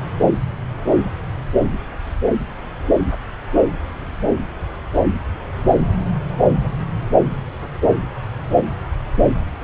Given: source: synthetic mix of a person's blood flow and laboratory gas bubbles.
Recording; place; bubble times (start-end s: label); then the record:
Doppler ultrasound of blood flow; subclavian vein
no bubbles
From the record:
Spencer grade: 0 (complete lack of bubble signals)